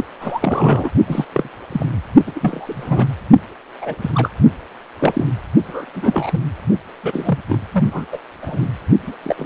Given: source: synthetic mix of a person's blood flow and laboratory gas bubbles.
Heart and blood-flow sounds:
Doppler ultrasound of blood flow; precordium
0.00-0.04 s: bubbles
0.20-0.90 s: bubbles
1.07-1.25 s: bubbles
1.32-1.49 s: bubbles
1.71-1.86 s: bubbles
2.27-2.31 s: bubbles
2.35-3.06 s: bubbles
3.81-3.95 s: bubbles
4.01-4.10 s: bubbles
4.14-4.29 s: bubbles
4.99-5.32 s: bubbles
5.65-5.85 s: bubbles
5.94-6.38 s: bubbles
7.03-7.38 s: bubbles
7.48-7.58 s: bubbles
7.73-7.83 s: bubbles
7.85-8.05 s: bubbles
8.12-8.19 s: bubbles
8.42-8.67 s: bubbles
9.07-9.13 s: bubbles
9.24-9.46 s: bubbles
From the record:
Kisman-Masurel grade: 242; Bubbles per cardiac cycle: several, 3 to 8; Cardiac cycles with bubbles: 100%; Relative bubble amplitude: moderate (0.250 to 0.450); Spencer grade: 3 (all of the cardiac periods contain showers or single bubble signals, but not dominating or overriding the cardiac motion signals); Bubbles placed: only in the low amplitude regions of the cardiac cycle

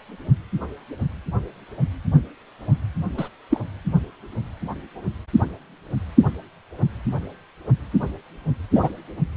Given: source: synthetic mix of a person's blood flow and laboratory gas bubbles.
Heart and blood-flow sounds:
Doppler ultrasound of blood flow; precordium
3.17-3.29 s: bubbles
3.50-3.60 s: bubbles
8.74-8.88 s: bubbles
From the record:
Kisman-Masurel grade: 122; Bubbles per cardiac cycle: 1 to 2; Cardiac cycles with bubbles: 10 to 50%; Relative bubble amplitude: moderate (0.250 to 0.450); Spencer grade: 2 (many but less than half of the cardiac periods contain bubble signals, singularly or in groups); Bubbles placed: only in the low amplitude regions of the cardiac cycle

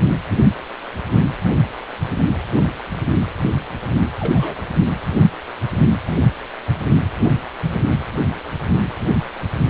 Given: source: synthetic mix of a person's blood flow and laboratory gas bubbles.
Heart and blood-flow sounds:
Doppler ultrasound of blood flow; precordium
4.20-4.56 s: bubbles
From the record:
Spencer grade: 1 (occasional bubble signal discernible with the cardiac motion signal, with majority of cardiac periods free of bubbles); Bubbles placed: anywhere in the cardiac cycle

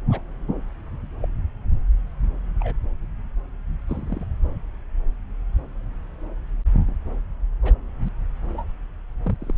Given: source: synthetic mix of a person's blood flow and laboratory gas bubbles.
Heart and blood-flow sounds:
Doppler ultrasound of blood flow; subclavian vein
0.10-0.21 s: bubbles
1.21-1.26 s: bubbles
2.60-2.74 s: bubbles
3.89-4.27 s: bubbles
7.62-7.73 s: bubbles
8.02-8.09 s: bubbles
8.48-8.64 s: bubbles
9.25-9.37 s: bubbles
9.40-9.53 s: bubbles
From the record:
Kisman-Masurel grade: 121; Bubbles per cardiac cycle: 1 to 2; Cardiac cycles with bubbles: 10 to 50%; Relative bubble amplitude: barely perceptible (0.100 to 0.250); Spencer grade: 2 (many but less than half of the cardiac periods contain bubble signals, singularly or in groups); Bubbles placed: anywhere in the cardiac cycle

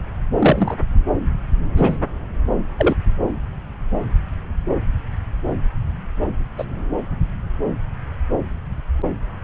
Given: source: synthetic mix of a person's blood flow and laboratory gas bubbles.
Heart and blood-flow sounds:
Doppler ultrasound of blood flow; subclavian vein
0.40-0.76 s: bubbles
1.77-1.98 s: bubbles
2.78-2.96 s: bubbles
6.58-6.64 s: bubbles
From the record:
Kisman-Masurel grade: 123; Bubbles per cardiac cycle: 1 to 2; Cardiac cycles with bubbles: 10 to 50%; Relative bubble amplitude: loud (0.450 to 0.775); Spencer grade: 2 (many but less than half of the cardiac periods contain bubble signals, singularly or in groups); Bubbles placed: anywhere in the cardiac cycle

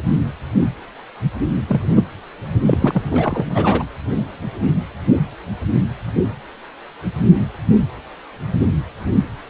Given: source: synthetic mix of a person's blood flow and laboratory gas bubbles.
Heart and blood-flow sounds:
Doppler ultrasound of blood flow; precordium
1.68-2.04 s: bubbles
2.65-3.02 s: bubbles
3.11-3.46 s: bubbles
3.50-3.84 s: bubbles
From the record:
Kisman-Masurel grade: 222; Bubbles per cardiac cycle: several, 3 to 8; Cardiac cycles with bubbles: 10 to 50%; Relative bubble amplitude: moderate (0.250 to 0.450); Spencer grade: 2 (many but less than half of the cardiac periods contain bubble signals, singularly or in groups); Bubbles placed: anywhere in the cardiac cycle

